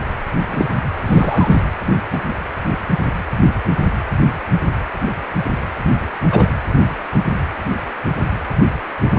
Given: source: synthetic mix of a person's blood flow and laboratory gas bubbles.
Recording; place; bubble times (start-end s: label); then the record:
Doppler ultrasound of blood flow; precordium
0.50-0.67 s: bubbles
1.06-1.61 s: bubbles
2.12-2.19 s: bubbles
2.27-2.33 s: bubbles
6.31-6.50 s: bubbles
From the record:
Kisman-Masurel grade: 123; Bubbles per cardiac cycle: 1 to 2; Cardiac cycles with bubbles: 10 to 50%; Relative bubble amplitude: loud (0.450 to 0.775); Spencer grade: 2 (many but less than half of the cardiac periods contain bubble signals, singularly or in groups); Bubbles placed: anywhere in the cardiac cycle